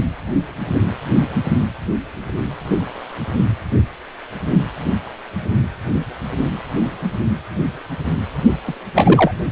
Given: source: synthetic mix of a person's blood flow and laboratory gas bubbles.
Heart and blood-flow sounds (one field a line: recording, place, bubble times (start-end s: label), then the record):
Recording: Doppler ultrasound of blood flow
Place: precordium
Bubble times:
8.67-8.74 s: bubbles
8.95-9.31 s: bubbles
From the record:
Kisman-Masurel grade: 213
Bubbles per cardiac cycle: several, 3 to 8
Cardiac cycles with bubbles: 1 to 10%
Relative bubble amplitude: loud (0.450 to 0.775)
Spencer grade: 1 (occasional bubble signal discernible with the cardiac motion signal, with majority of cardiac periods free of bubbles)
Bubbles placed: only in the low amplitude regions of the cardiac cycle